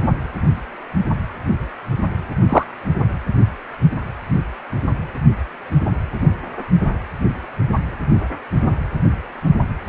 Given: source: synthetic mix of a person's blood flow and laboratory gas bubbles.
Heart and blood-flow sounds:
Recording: Doppler ultrasound of blood flow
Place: precordium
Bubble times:
2.49-2.63 s: bubbles
From the record:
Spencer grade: 1 (occasional bubble signal discernible with the cardiac motion signal, with majority of cardiac periods free of bubbles)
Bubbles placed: anywhere in the cardiac cycle

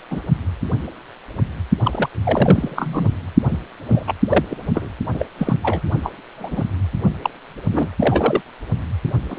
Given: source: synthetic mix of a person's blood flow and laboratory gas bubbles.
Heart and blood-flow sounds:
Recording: Doppler ultrasound of blood flow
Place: precordium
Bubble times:
0.10-0.21 s: bubbles
1.84-2.09 s: bubbles
2.23-3.13 s: bubbles
3.50-3.58 s: bubbles
3.87-4.04 s: bubbles
4.07-4.13 s: bubbles
4.29-4.45 s: bubbles
4.50-4.56 s: bubbles
4.75-4.92 s: bubbles
5.13-5.26 s: bubbles
5.38-5.54 s: bubbles
5.62-5.81 s: bubbles
6.03-6.12 s: bubbles
6.33-6.68 s: bubbles
7.23-7.30 s: bubbles
7.72-7.89 s: bubbles
7.99-8.41 s: bubbles
9.28-9.39 s: bubbles
From the record:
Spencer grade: 3 (all of the cardiac periods contain showers or single bubble signals, but not dominating or overriding the cardiac motion signals)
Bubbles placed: only in the low amplitude regions of the cardiac cycle

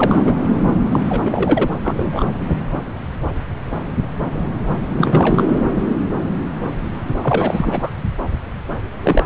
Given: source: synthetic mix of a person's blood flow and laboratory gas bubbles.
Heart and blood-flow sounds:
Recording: Doppler ultrasound of blood flow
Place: subclavian vein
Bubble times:
0.00-0.51 s: bubbles
0.92-0.99 s: bubbles
1.09-1.69 s: bubbles
1.84-2.24 s: bubbles
4.97-5.45 s: bubbles
7.22-7.90 s: bubbles
9.03-9.26 s: bubbles
From the record:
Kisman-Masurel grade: 332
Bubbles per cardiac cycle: rolling drumbeat, 9 or more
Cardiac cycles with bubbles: 50 to 99%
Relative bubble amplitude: moderate (0.250 to 0.450)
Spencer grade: 3 (all of the cardiac periods contain showers or single bubble signals, but not dominating or overriding the cardiac motion signals)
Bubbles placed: anywhere in the cardiac cycle

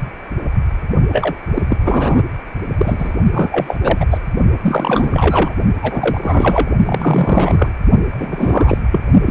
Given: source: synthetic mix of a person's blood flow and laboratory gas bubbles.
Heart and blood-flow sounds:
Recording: Doppler ultrasound of blood flow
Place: precordium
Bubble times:
1.12-1.35 s: bubbles
1.54-1.62 s: bubbles
1.69-1.76 s: bubbles
1.84-2.22 s: bubbles
2.77-3.12 s: bubbles
3.32-3.76 s: bubbles
3.83-4.06 s: bubbles
4.10-4.18 s: bubbles
4.62-5.54 s: bubbles
5.81-6.69 s: bubbles
6.85-7.73 s: bubbles
8.13-8.78 s: bubbles
8.92-9.01 s: bubbles
9.25-9.31 s: bubbles
From the record:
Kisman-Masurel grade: 333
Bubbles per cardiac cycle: rolling drumbeat, 9 or more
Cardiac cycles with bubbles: 50 to 99%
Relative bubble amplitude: loud (0.450 to 0.775)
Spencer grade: 3 (all of the cardiac periods contain showers or single bubble signals, but not dominating or overriding the cardiac motion signals)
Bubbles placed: only in the low amplitude regions of the cardiac cycle

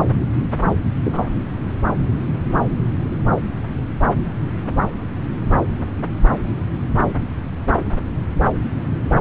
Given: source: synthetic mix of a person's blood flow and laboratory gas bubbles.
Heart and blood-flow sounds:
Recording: Doppler ultrasound of blood flow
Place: subclavian vein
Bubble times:
1.03-1.29 s: bubbles
From the record:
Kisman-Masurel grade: 112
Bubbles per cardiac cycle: 1 to 2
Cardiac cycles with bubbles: 1 to 10%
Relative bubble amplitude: moderate (0.250 to 0.450)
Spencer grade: 1 (occasional bubble signal discernible with the cardiac motion signal, with majority of cardiac periods free of bubbles)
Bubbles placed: anywhere in the cardiac cycle

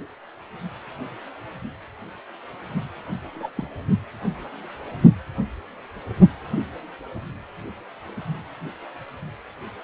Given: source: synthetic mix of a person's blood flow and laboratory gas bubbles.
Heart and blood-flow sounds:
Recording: Doppler ultrasound of blood flow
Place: precordium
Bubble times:
3.34-3.49 s: bubbles
3.56-3.68 s: bubbles
From the record:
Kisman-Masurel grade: 121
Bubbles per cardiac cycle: 1 to 2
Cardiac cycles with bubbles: 10 to 50%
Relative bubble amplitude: barely perceptible (0.100 to 0.250)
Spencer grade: 2 (many but less than half of the cardiac periods contain bubble signals, singularly or in groups)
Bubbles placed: anywhere in the cardiac cycle

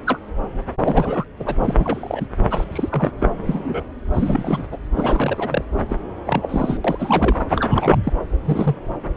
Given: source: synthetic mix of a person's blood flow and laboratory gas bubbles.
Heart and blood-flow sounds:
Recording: Doppler ultrasound of blood flow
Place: subclavian vein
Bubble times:
0.06-0.18 s: bubbles
0.83-1.25 s: bubbles
1.39-1.56 s: bubbles
1.63-1.75 s: bubbles
1.77-2.26 s: bubbles
2.50-2.64 s: bubbles
2.72-3.10 s: bubbles
3.19-3.27 s: bubbles
3.46-3.85 s: bubbles
4.14-4.68 s: bubbles
4.72-4.78 s: bubbles
4.96-5.65 s: bubbles
5.89-5.97 s: bubbles
6.26-6.79 s: bubbles
6.84-7.44 s: bubbles
7.49-7.98 s: bubbles
8.04-8.12 s: bubbles
8.45-8.76 s: bubbles
From the record:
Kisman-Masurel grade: 242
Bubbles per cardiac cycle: several, 3 to 8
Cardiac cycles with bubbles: 100%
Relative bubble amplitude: moderate (0.250 to 0.450)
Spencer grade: 3 (all of the cardiac periods contain showers or single bubble signals, but not dominating or overriding the cardiac motion signals)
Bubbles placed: anywhere in the cardiac cycle

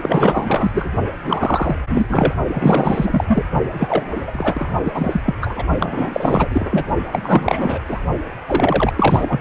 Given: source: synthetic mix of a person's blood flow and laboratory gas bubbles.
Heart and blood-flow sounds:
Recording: Doppler ultrasound of blood flow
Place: precordium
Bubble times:
0.02-0.89 s: bubbles
1.25-1.79 s: bubbles
1.89-2.33 s: bubbles
2.53-3.24 s: bubbles
3.27-3.44 s: bubbles
3.72-4.74 s: bubbles
4.83-5.21 s: bubbles
5.25-5.35 s: bubbles
5.41-5.64 s: bubbles
5.78-6.84 s: bubbles
7.11-7.79 s: bubbles
7.88-7.99 s: bubbles
8.46-8.93 s: bubbles
8.96-9.41 s: bubbles
From the record:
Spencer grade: 4 (maximum detectable bubble signal sounding continuously throughout systole and diastole of every cardiac period, and overriding the amplitude of the normal cardiac signals)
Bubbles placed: only in the low amplitude regions of the cardiac cycle

